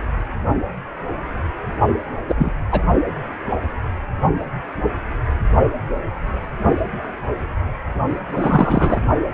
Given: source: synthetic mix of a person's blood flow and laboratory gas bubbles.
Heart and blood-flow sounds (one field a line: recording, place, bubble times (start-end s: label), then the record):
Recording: Doppler ultrasound of blood flow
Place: precordium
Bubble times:
2.28-2.52 s: bubbles
2.72-2.81 s: bubbles
8.32-9.01 s: bubbles
From the record:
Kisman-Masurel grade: 223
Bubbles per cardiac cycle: several, 3 to 8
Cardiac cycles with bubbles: 10 to 50%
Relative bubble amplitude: loud (0.450 to 0.775)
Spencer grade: 2 (many but less than half of the cardiac periods contain bubble signals, singularly or in groups)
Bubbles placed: only in the low amplitude regions of the cardiac cycle